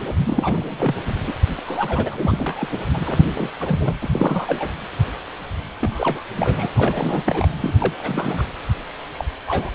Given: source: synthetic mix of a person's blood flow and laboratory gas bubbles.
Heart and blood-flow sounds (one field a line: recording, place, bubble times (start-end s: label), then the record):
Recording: Doppler ultrasound of blood flow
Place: precordium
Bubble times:
0.24-1.02 s: bubbles
1.07-1.14 s: bubbles
1.26-1.33 s: bubbles
1.66-2.84 s: bubbles
2.94-3.23 s: bubbles
3.33-3.49 s: bubbles
3.60-3.94 s: bubbles
4.01-4.10 s: bubbles
4.15-4.72 s: bubbles
5.81-6.23 s: bubbles
6.37-6.67 s: bubbles
6.75-7.52 s: bubbles
7.62-7.73 s: bubbles
7.79-7.93 s: bubbles
7.98-8.46 s: bubbles
9.12-9.24 s: bubbles
9.46-9.75 s: bubbles
From the record:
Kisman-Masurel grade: 332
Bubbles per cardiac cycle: rolling drumbeat, 9 or more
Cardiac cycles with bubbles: 50 to 99%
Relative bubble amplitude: moderate (0.250 to 0.450)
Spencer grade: 3 (all of the cardiac periods contain showers or single bubble signals, but not dominating or overriding the cardiac motion signals)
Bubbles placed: anywhere in the cardiac cycle